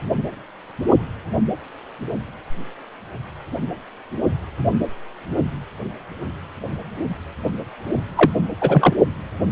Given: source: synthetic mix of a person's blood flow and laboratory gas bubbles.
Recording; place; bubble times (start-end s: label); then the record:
Doppler ultrasound of blood flow; precordium
8.17-8.31 s: bubbles
8.61-8.96 s: bubbles
From the record:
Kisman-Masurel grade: 213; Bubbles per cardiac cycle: several, 3 to 8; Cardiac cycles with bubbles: 1 to 10%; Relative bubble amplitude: loud (0.450 to 0.775); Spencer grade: 1 (occasional bubble signal discernible with the cardiac motion signal, with majority of cardiac periods free of bubbles); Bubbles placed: only in the low amplitude regions of the cardiac cycle